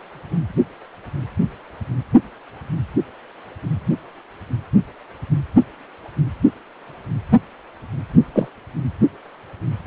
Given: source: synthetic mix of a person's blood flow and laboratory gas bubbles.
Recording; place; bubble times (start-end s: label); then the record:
Doppler ultrasound of blood flow; precordium
8.34-8.48 s: bubbles
From the record:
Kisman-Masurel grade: 112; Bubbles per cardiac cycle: 1 to 2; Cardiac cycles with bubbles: 1 to 10%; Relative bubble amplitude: moderate (0.250 to 0.450); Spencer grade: 1 (occasional bubble signal discernible with the cardiac motion signal, with majority of cardiac periods free of bubbles); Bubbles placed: anywhere in the cardiac cycle